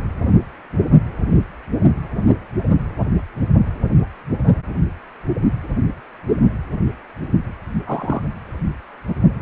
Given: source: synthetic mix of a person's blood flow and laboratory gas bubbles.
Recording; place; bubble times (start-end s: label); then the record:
Doppler ultrasound of blood flow; precordium
7.87-8.21 s: bubbles
From the record:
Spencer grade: 1 (occasional bubble signal discernible with the cardiac motion signal, with majority of cardiac periods free of bubbles); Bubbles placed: only in the low amplitude regions of the cardiac cycle